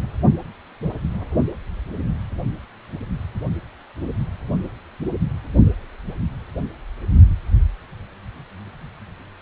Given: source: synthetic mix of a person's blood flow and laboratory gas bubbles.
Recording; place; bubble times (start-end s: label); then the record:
Doppler ultrasound of blood flow; precordium
no bubbles
From the record:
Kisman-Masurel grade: 000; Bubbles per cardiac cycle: 0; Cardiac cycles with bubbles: 0%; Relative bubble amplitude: no bubbles discernible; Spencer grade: 0 (complete lack of bubble signals)